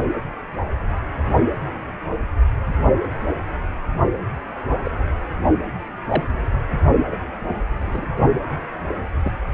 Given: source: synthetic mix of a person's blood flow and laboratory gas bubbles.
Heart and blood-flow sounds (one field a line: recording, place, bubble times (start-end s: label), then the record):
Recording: Doppler ultrasound of blood flow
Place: precordium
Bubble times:
4.84-4.91 s: bubbles
6.08-6.24 s: bubbles
7.11-7.16 s: bubbles
7.86-8.09 s: bubbles
9.23-9.31 s: bubbles
From the record:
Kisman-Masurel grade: 122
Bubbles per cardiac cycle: 1 to 2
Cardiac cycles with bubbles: 10 to 50%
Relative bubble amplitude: moderate (0.250 to 0.450)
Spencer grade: 2 (many but less than half of the cardiac periods contain bubble signals, singularly or in groups)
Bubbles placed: only in the low amplitude regions of the cardiac cycle